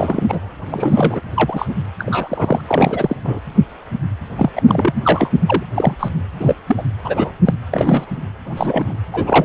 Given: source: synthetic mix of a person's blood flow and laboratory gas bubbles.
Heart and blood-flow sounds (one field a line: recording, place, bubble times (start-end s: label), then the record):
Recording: Doppler ultrasound of blood flow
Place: precordium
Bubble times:
0.00-0.51 s: bubbles
0.63-1.21 s: bubbles
1.35-1.75 s: bubbles
1.98-2.61 s: bubbles
2.67-3.17 s: bubbles
3.24-3.39 s: bubbles
4.38-4.50 s: bubbles
4.56-4.62 s: bubbles
4.67-5.29 s: bubbles
5.46-5.63 s: bubbles
5.75-5.96 s: bubbles
5.99-6.08 s: bubbles
6.39-6.55 s: bubbles
6.67-6.83 s: bubbles
7.04-7.31 s: bubbles
7.45-7.54 s: bubbles
7.73-8.06 s: bubbles
8.45-8.93 s: bubbles
9.12-9.45 s: bubbles
From the record:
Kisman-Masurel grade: 233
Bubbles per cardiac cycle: several, 3 to 8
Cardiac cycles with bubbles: 50 to 99%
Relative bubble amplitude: loud (0.450 to 0.775)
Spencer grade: 3 (all of the cardiac periods contain showers or single bubble signals, but not dominating or overriding the cardiac motion signals)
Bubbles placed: anywhere in the cardiac cycle